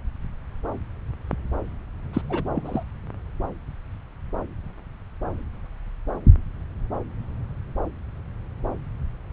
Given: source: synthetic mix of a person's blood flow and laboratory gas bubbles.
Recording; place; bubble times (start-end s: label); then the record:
Doppler ultrasound of blood flow; subclavian vein
2.13-2.22 s: bubbles
2.29-2.42 s: bubbles
2.54-2.83 s: bubbles
From the record:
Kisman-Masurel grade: 212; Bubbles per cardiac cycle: several, 3 to 8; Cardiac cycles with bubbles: 1 to 10%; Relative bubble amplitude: moderate (0.250 to 0.450); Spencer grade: 1 (occasional bubble signal discernible with the cardiac motion signal, with majority of cardiac periods free of bubbles); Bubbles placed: anywhere in the cardiac cycle